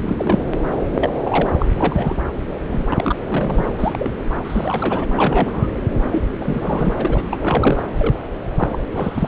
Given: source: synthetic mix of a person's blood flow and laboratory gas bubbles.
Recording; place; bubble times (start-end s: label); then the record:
Doppler ultrasound of blood flow; subclavian vein
0.02-0.43 s: bubbles
0.93-1.10 s: bubbles
1.19-1.53 s: bubbles
1.58-1.66 s: bubbles
1.78-2.17 s: bubbles
2.71-3.16 s: bubbles
3.27-3.67 s: bubbles
3.79-4.09 s: bubbles
4.29-4.35 s: bubbles
4.45-5.07 s: bubbles
5.13-5.69 s: bubbles
6.12-6.21 s: bubbles
6.41-7.38 s: bubbles
7.41-7.82 s: bubbles
7.99-8.18 s: bubbles
8.56-8.69 s: bubbles
8.72-8.78 s: bubbles
8.93-9.28 s: bubbles
From the record:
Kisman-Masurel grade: 242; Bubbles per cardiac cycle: several, 3 to 8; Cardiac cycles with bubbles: 100%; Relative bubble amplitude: moderate (0.250 to 0.450); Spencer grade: 3 (all of the cardiac periods contain showers or single bubble signals, but not dominating or overriding the cardiac motion signals); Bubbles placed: anywhere in the cardiac cycle